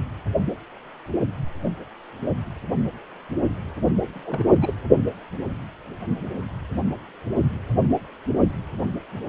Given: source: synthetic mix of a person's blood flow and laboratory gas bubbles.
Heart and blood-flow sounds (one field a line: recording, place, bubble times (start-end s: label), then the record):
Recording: Doppler ultrasound of blood flow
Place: precordium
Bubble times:
4.15-4.21 s: bubbles
4.25-4.44 s: bubbles
4.52-4.74 s: bubbles
From the record:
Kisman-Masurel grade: 211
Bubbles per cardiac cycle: several, 3 to 8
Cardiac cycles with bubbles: 1 to 10%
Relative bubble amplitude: barely perceptible (0.100 to 0.250)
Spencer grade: 1 (occasional bubble signal discernible with the cardiac motion signal, with majority of cardiac periods free of bubbles)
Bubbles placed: only in the low amplitude regions of the cardiac cycle